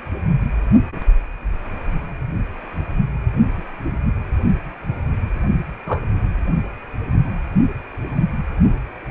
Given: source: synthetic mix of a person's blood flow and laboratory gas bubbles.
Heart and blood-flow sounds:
Doppler ultrasound of blood flow; precordium
5.87-6.02 s: bubbles
From the record:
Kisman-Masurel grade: 112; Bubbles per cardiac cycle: 1 to 2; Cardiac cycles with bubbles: 1 to 10%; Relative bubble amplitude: moderate (0.250 to 0.450); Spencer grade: 1 (occasional bubble signal discernible with the cardiac motion signal, with majority of cardiac periods free of bubbles); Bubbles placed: only in the low amplitude regions of the cardiac cycle

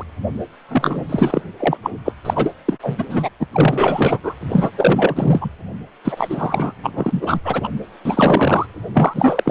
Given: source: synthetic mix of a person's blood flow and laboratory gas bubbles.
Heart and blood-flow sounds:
Doppler ultrasound of blood flow; precordium
0.00-0.04 s: bubbles
0.69-1.03 s: bubbles
1.09-1.42 s: bubbles
1.58-1.77 s: bubbles
1.83-1.90 s: bubbles
2.04-2.12 s: bubbles
2.25-2.53 s: bubbles
2.68-2.77 s: bubbles
2.82-3.04 s: bubbles
3.10-3.29 s: bubbles
3.39-3.46 s: bubbles
3.52-4.19 s: bubbles
4.23-4.34 s: bubbles
4.49-4.70 s: bubbles
4.77-5.50 s: bubbles
6.04-6.72 s: bubbles
6.83-7.40 s: bubbles
7.44-7.69 s: bubbles
8.05-8.66 s: bubbles
8.93-9.51 s: bubbles
From the record:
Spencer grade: 4 (maximum detectable bubble signal sounding continuously throughout systole and diastole of every cardiac period, and overriding the amplitude of the normal cardiac signals); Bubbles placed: anywhere in the cardiac cycle

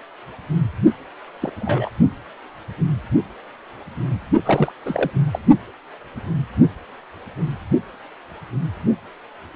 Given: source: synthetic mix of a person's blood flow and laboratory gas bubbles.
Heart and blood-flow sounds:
Doppler ultrasound of blood flow; precordium
1.41-1.50 s: bubbles
1.58-1.90 s: bubbles
4.46-4.72 s: bubbles
4.86-5.11 s: bubbles
5.31-5.39 s: bubbles
From the record:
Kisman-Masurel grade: 222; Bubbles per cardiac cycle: several, 3 to 8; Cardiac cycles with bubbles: 10 to 50%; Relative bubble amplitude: moderate (0.250 to 0.450); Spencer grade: 2 (many but less than half of the cardiac periods contain bubble signals, singularly or in groups); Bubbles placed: only in the low amplitude regions of the cardiac cycle

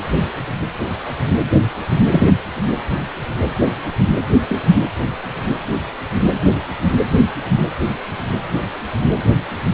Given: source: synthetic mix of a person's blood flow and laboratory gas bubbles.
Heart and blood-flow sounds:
Doppler ultrasound of blood flow; precordium
2.10-2.31 s: bubbles
4.49-4.61 s: bubbles
From the record:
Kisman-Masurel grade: 113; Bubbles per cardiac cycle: 1 to 2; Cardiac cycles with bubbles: 1 to 10%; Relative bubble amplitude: loud (0.450 to 0.775); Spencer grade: 1 (occasional bubble signal discernible with the cardiac motion signal, with majority of cardiac periods free of bubbles); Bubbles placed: anywhere in the cardiac cycle

